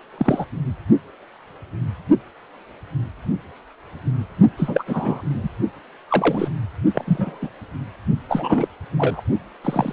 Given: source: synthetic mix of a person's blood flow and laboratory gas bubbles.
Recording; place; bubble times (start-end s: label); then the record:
Doppler ultrasound of blood flow; precordium
0.17-0.46 s: bubbles
4.57-4.83 s: bubbles
4.86-5.23 s: bubbles
5.29-5.50 s: bubbles
6.08-6.48 s: bubbles
6.95-7.50 s: bubbles
8.29-8.68 s: bubbles
8.97-9.21 s: bubbles
9.63-9.93 s: bubbles
From the record:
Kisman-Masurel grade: 232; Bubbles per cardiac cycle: several, 3 to 8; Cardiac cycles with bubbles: 50 to 99%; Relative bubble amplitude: moderate (0.250 to 0.450); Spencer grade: 3 (all of the cardiac periods contain showers or single bubble signals, but not dominating or overriding the cardiac motion signals); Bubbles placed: only in the low amplitude regions of the cardiac cycle